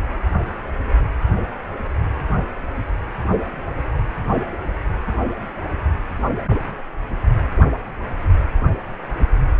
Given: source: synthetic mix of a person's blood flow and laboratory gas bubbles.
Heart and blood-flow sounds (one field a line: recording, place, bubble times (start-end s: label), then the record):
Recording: Doppler ultrasound of blood flow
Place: precordium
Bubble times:
no bubbles
From the record:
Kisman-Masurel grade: 000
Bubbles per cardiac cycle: 0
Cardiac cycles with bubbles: 0%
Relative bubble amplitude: no bubbles discernible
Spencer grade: 0 (complete lack of bubble signals)